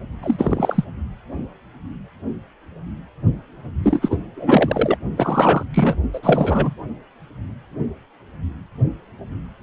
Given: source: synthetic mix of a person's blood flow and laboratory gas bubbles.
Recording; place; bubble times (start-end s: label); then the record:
Doppler ultrasound of blood flow; precordium
0.23-0.84 s: bubbles
3.84-4.18 s: bubbles
4.36-4.96 s: bubbles
5.16-5.64 s: bubbles
5.73-5.96 s: bubbles
6.13-6.20 s: bubbles
6.22-6.74 s: bubbles
From the record:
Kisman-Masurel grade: 333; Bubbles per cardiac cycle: rolling drumbeat, 9 or more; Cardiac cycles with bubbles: 50 to 99%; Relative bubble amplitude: loud (0.450 to 0.775); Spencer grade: 3 (all of the cardiac periods contain showers or single bubble signals, but not dominating or overriding the cardiac motion signals); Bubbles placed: only in the low amplitude regions of the cardiac cycle